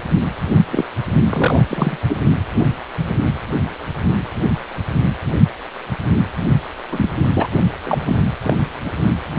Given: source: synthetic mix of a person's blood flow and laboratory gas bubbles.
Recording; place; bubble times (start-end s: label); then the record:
Doppler ultrasound of blood flow; precordium
0.71-0.84 s: bubbles
1.29-1.65 s: bubbles
1.68-1.98 s: bubbles
2.09-2.17 s: bubbles
6.90-7.27 s: bubbles
7.33-7.48 s: bubbles
7.84-8.02 s: bubbles
8.06-8.17 s: bubbles
8.45-8.56 s: bubbles
8.84-8.90 s: bubbles
From the record:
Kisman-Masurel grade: 223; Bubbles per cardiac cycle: several, 3 to 8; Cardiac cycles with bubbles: 10 to 50%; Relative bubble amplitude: loud (0.450 to 0.775); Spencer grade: 2 (many but less than half of the cardiac periods contain bubble signals, singularly or in groups); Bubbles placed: only in the low amplitude regions of the cardiac cycle